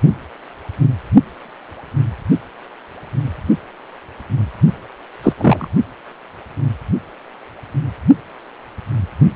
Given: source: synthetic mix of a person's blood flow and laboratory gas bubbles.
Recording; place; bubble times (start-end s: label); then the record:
Doppler ultrasound of blood flow; precordium
5.22-5.33 s: bubbles
5.37-5.68 s: bubbles
From the record:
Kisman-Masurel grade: 113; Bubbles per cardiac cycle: 1 to 2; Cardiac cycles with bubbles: 1 to 10%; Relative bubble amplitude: loud (0.450 to 0.775); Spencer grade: 1 (occasional bubble signal discernible with the cardiac motion signal, with majority of cardiac periods free of bubbles); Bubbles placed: only in the low amplitude regions of the cardiac cycle